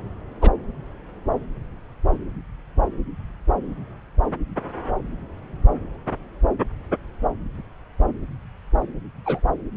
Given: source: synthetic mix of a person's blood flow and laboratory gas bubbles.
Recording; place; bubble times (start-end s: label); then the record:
Doppler ultrasound of blood flow; subclavian vein
0.42-0.49 s: bubbles
9.25-9.39 s: bubbles
From the record:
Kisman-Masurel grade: 112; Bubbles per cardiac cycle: 1 to 2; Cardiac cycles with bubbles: 1 to 10%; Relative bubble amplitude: moderate (0.250 to 0.450); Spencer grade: 1 (occasional bubble signal discernible with the cardiac motion signal, with majority of cardiac periods free of bubbles); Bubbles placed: anywhere in the cardiac cycle